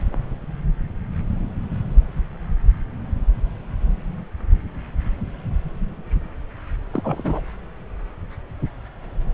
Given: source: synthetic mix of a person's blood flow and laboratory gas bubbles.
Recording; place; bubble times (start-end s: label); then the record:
Doppler ultrasound of blood flow; subclavian vein
6.91-7.41 s: bubbles
From the record:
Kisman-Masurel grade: 212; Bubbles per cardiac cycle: several, 3 to 8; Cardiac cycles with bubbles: 1 to 10%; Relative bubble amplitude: moderate (0.250 to 0.450); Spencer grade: 1 (occasional bubble signal discernible with the cardiac motion signal, with majority of cardiac periods free of bubbles); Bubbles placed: anywhere in the cardiac cycle